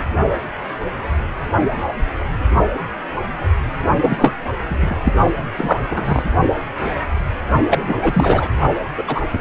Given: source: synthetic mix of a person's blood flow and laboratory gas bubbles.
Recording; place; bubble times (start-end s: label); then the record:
Doppler ultrasound of blood flow; precordium
4.01-4.35 s: bubbles
4.67-5.14 s: bubbles
5.56-5.85 s: bubbles
5.91-6.23 s: bubbles
7.69-7.95 s: bubbles
8.02-8.50 s: bubbles
8.97-9.03 s: bubbles
9.07-9.21 s: bubbles
9.33-9.38 s: bubbles
From the record:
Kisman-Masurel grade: 223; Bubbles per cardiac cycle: several, 3 to 8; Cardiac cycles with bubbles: 10 to 50%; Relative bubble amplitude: loud (0.450 to 0.775); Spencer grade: 2 (many but less than half of the cardiac periods contain bubble signals, singularly or in groups); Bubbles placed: only in the low amplitude regions of the cardiac cycle